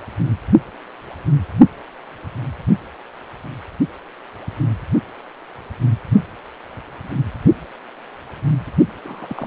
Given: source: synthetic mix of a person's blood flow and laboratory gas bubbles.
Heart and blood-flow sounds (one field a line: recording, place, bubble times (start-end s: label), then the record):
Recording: Doppler ultrasound of blood flow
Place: precordium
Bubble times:
9.04-9.47 s: bubbles
From the record:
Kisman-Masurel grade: 211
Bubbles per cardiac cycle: several, 3 to 8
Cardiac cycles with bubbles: 1 to 10%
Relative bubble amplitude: barely perceptible (0.100 to 0.250)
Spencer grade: 1 (occasional bubble signal discernible with the cardiac motion signal, with majority of cardiac periods free of bubbles)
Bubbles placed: only in the low amplitude regions of the cardiac cycle